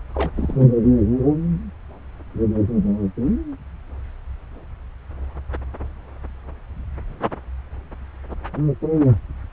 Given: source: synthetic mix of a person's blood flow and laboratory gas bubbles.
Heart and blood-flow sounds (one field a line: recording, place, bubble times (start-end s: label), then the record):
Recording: Doppler ultrasound of blood flow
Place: subclavian vein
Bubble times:
0.14-0.31 s: bubbles
0.36-0.68 s: bubbles
From the record:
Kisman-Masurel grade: 212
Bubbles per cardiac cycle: several, 3 to 8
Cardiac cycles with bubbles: 1 to 10%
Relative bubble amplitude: moderate (0.250 to 0.450)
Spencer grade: 1 (occasional bubble signal discernible with the cardiac motion signal, with majority of cardiac periods free of bubbles)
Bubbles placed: anywhere in the cardiac cycle